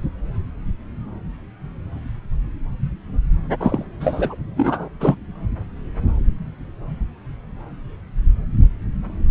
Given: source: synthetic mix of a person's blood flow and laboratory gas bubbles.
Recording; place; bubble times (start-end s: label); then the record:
Doppler ultrasound of blood flow; subclavian vein
3.59-3.85 s: bubbles
4.00-4.36 s: bubbles
4.57-4.89 s: bubbles
5.00-5.15 s: bubbles
From the record:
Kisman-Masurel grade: 213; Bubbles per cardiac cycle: several, 3 to 8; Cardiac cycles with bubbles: 1 to 10%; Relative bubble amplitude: loud (0.450 to 0.775); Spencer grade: 1 (occasional bubble signal discernible with the cardiac motion signal, with majority of cardiac periods free of bubbles); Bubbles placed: anywhere in the cardiac cycle